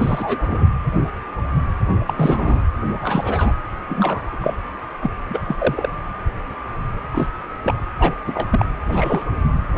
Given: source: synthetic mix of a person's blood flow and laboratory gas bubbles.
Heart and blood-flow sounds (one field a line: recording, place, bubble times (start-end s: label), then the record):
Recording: Doppler ultrasound of blood flow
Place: precordium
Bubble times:
0.00-0.65 s: bubbles
2.06-2.13 s: bubbles
2.16-2.65 s: bubbles
3.02-3.53 s: bubbles
3.89-4.38 s: bubbles
4.41-4.54 s: bubbles
5.01-5.11 s: bubbles
5.29-5.42 s: bubbles
5.47-5.56 s: bubbles
5.58-5.89 s: bubbles
7.10-7.28 s: bubbles
7.63-7.75 s: bubbles
7.99-8.15 s: bubbles
8.27-8.66 s: bubbles
8.86-9.25 s: bubbles
9.75-9.78 s: bubbles
From the record:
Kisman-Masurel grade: 232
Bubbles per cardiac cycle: several, 3 to 8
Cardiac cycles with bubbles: 50 to 99%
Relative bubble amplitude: moderate (0.250 to 0.450)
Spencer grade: 3 (all of the cardiac periods contain showers or single bubble signals, but not dominating or overriding the cardiac motion signals)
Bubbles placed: anywhere in the cardiac cycle